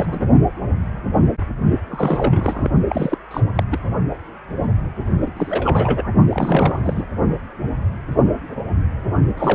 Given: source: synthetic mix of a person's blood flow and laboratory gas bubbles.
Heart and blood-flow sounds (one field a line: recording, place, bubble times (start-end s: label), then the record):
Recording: Doppler ultrasound of blood flow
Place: precordium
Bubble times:
0.00-0.26 s: bubbles
1.90-2.69 s: bubbles
2.89-3.17 s: bubbles
3.30-3.40 s: bubbles
3.55-3.63 s: bubbles
3.70-3.79 s: bubbles
5.21-5.32 s: bubbles
5.37-6.09 s: bubbles
6.30-7.03 s: bubbles
9.37-9.55 s: bubbles
From the record:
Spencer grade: 3 (all of the cardiac periods contain showers or single bubble signals, but not dominating or overriding the cardiac motion signals)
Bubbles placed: only in the low amplitude regions of the cardiac cycle